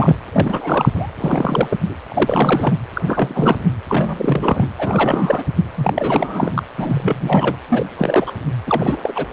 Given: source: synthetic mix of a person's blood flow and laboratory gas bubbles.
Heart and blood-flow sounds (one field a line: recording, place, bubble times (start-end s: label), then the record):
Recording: Doppler ultrasound of blood flow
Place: precordium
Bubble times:
0.00-0.15 s: bubbles
0.31-1.09 s: bubbles
1.20-1.77 s: bubbles
1.85-1.94 s: bubbles
2.10-2.73 s: bubbles
2.94-3.02 s: bubbles
3.07-3.56 s: bubbles
3.88-4.68 s: bubbles
4.78-5.46 s: bubbles
5.77-6.63 s: bubbles
6.78-7.55 s: bubbles
7.69-7.84 s: bubbles
7.97-8.31 s: bubbles
8.66-9.26 s: bubbles
From the record:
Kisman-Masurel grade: 342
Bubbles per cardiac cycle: rolling drumbeat, 9 or more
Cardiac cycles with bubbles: 100%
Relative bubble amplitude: moderate (0.250 to 0.450)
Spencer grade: 3 (all of the cardiac periods contain showers or single bubble signals, but not dominating or overriding the cardiac motion signals)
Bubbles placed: anywhere in the cardiac cycle